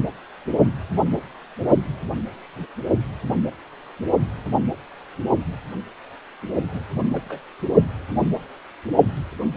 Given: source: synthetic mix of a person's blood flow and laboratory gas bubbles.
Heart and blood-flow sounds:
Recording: Doppler ultrasound of blood flow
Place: precordium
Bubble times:
6.67-6.84 s: bubbles
6.98-7.03 s: bubbles
7.12-7.40 s: bubbles
From the record:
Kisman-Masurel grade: 221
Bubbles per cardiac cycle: several, 3 to 8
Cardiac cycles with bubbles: 10 to 50%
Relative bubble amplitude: barely perceptible (0.100 to 0.250)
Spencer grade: 2 (many but less than half of the cardiac periods contain bubble signals, singularly or in groups)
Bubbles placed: only in the low amplitude regions of the cardiac cycle

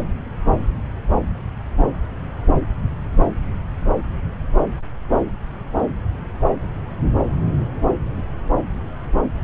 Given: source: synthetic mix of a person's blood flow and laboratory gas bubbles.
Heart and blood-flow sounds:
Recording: Doppler ultrasound of blood flow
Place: subclavian vein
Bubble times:
no bubbles
From the record:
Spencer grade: 0 (complete lack of bubble signals)

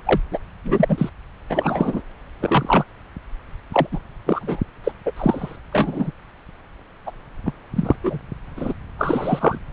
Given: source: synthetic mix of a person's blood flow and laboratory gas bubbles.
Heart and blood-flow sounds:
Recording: Doppler ultrasound of blood flow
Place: subclavian vein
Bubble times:
0.05-0.20 s: bubbles
0.31-0.39 s: bubbles
0.64-1.10 s: bubbles
1.50-2.01 s: bubbles
2.40-2.84 s: bubbles
3.72-3.87 s: bubbles
3.92-4.00 s: bubbles
4.26-4.60 s: bubbles
4.83-4.92 s: bubbles
5.05-5.11 s: bubbles
5.16-5.56 s: bubbles
5.72-6.11 s: bubbles
7.06-7.11 s: bubbles
7.46-7.52 s: bubbles
7.75-7.96 s: bubbles
8.04-8.18 s: bubbles
8.56-8.73 s: bubbles
8.98-9.58 s: bubbles
From the record:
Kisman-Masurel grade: 243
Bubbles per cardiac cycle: several, 3 to 8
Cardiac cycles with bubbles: 100%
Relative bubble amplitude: loud (0.450 to 0.775)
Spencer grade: 3 (all of the cardiac periods contain showers or single bubble signals, but not dominating or overriding the cardiac motion signals)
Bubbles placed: anywhere in the cardiac cycle

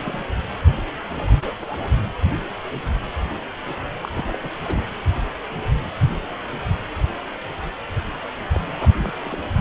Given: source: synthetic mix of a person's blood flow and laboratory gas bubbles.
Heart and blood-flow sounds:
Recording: Doppler ultrasound of blood flow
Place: precordium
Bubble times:
0.00-0.24 s: bubbles
1.17-1.24 s: bubbles
1.27-1.91 s: bubbles
4.03-4.25 s: bubbles
4.27-4.38 s: bubbles
4.40-4.48 s: bubbles
4.63-4.86 s: bubbles
8.54-8.59 s: bubbles
8.66-8.74 s: bubbles
8.78-9.12 s: bubbles
9.19-9.38 s: bubbles
From the record:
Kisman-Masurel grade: 221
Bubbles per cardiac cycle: several, 3 to 8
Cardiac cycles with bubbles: 10 to 50%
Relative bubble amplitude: barely perceptible (0.100 to 0.250)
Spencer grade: 2 (many but less than half of the cardiac periods contain bubble signals, singularly or in groups)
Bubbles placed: anywhere in the cardiac cycle

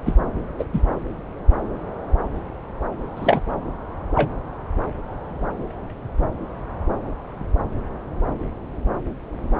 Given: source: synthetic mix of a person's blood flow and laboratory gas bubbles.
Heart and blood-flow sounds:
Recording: Doppler ultrasound of blood flow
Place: subclavian vein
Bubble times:
0.06-0.14 s: bubbles
0.59-0.65 s: bubbles
0.73-0.81 s: bubbles
3.16-3.40 s: bubbles
4.15-4.32 s: bubbles
From the record:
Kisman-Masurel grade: 122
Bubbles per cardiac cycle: 1 to 2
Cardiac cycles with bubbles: 10 to 50%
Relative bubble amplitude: moderate (0.250 to 0.450)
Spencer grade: 2 (many but less than half of the cardiac periods contain bubble signals, singularly or in groups)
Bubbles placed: anywhere in the cardiac cycle

